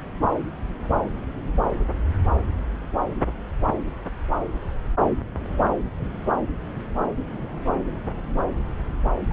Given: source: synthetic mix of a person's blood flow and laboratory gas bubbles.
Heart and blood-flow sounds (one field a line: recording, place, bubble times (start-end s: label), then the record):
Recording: Doppler ultrasound of blood flow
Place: subclavian vein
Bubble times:
9.29-9.32 s: bubbles
From the record:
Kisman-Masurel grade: 213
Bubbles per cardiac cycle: several, 3 to 8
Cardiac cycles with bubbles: 1 to 10%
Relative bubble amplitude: loud (0.450 to 0.775)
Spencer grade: 1 (occasional bubble signal discernible with the cardiac motion signal, with majority of cardiac periods free of bubbles)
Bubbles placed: anywhere in the cardiac cycle